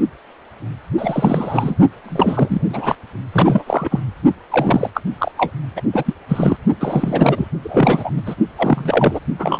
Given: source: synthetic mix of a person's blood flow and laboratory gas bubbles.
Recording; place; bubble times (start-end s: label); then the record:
Doppler ultrasound of blood flow; precordium
0.98-1.76 s: bubbles
2.04-2.96 s: bubbles
3.32-4.00 s: bubbles
4.50-4.90 s: bubbles
4.94-5.02 s: bubbles
5.18-5.32 s: bubbles
5.37-5.53 s: bubbles
5.76-5.82 s: bubbles
5.93-6.14 s: bubbles
6.28-6.57 s: bubbles
6.80-7.48 s: bubbles
7.63-8.11 s: bubbles
8.16-8.22 s: bubbles
8.26-8.35 s: bubbles
8.58-9.20 s: bubbles
9.38-9.59 s: bubbles
From the record:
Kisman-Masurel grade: 333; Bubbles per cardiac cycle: rolling drumbeat, 9 or more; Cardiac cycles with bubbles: 50 to 99%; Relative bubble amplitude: loud (0.450 to 0.775); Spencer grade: 3 (all of the cardiac periods contain showers or single bubble signals, but not dominating or overriding the cardiac motion signals); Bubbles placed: only in the low amplitude regions of the cardiac cycle